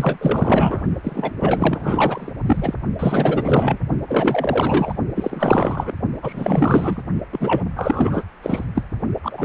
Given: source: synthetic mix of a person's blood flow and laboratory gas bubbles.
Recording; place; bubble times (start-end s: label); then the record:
Doppler ultrasound of blood flow; precordium
0.00-0.17 s: bubbles
0.21-0.82 s: bubbles
1.04-1.32 s: bubbles
1.39-2.33 s: bubbles
2.46-2.75 s: bubbles
2.99-3.77 s: bubbles
4.07-4.94 s: bubbles
5.14-5.93 s: bubbles
6.22-7.03 s: bubbles
7.32-7.63 s: bubbles
7.76-8.26 s: bubbles
8.42-8.64 s: bubbles
8.75-8.84 s: bubbles
9.22-9.45 s: bubbles
From the record:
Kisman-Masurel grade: 444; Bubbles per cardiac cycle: continuous sound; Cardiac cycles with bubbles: 100%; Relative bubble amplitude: maximal (0.775 to 0.999); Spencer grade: 4 (maximum detectable bubble signal sounding continuously throughout systole and diastole of every cardiac period, and overriding the amplitude of the normal cardiac signals); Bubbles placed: only in the low amplitude regions of the cardiac cycle